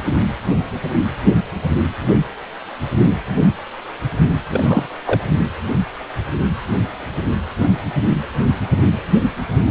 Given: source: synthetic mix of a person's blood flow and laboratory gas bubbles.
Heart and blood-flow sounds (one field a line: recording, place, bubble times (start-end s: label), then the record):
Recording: Doppler ultrasound of blood flow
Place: precordium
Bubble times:
4.50-4.87 s: bubbles
5.05-5.21 s: bubbles
From the record:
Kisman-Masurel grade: 222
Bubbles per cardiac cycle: several, 3 to 8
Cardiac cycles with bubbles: 10 to 50%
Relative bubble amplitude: moderate (0.250 to 0.450)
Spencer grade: 2 (many but less than half of the cardiac periods contain bubble signals, singularly or in groups)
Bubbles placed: anywhere in the cardiac cycle